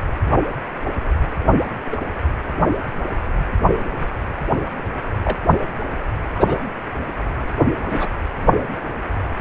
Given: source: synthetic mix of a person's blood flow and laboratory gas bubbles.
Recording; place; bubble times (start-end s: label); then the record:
Doppler ultrasound of blood flow; precordium
1.91-1.97 s: bubbles
5.24-5.38 s: bubbles
6.34-6.61 s: bubbles
7.89-8.10 s: bubbles
From the record:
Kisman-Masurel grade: 122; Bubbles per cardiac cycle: 1 to 2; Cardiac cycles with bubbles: 10 to 50%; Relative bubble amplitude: moderate (0.250 to 0.450); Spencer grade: 2 (many but less than half of the cardiac periods contain bubble signals, singularly or in groups); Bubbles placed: anywhere in the cardiac cycle